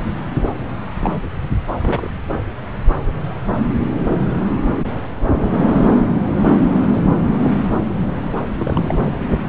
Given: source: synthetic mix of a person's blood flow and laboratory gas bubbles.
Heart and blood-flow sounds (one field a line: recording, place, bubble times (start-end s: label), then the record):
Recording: Doppler ultrasound of blood flow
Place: subclavian vein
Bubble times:
0.97-1.29 s: bubbles
1.80-2.08 s: bubbles
5.36-5.68 s: bubbles
6.82-7.09 s: bubbles
8.58-9.15 s: bubbles
From the record:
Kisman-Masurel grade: 222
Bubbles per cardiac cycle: several, 3 to 8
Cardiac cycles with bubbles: 10 to 50%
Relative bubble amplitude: moderate (0.250 to 0.450)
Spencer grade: 2 (many but less than half of the cardiac periods contain bubble signals, singularly or in groups)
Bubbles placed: anywhere in the cardiac cycle